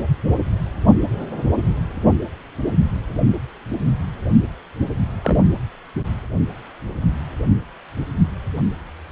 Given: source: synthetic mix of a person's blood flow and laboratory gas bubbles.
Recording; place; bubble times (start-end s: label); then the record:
Doppler ultrasound of blood flow; precordium
5.21-5.39 s: bubbles
From the record:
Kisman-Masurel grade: 112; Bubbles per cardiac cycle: 1 to 2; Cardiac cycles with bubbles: 1 to 10%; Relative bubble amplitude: moderate (0.250 to 0.450); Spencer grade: 1 (occasional bubble signal discernible with the cardiac motion signal, with majority of cardiac periods free of bubbles); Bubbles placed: only in the low amplitude regions of the cardiac cycle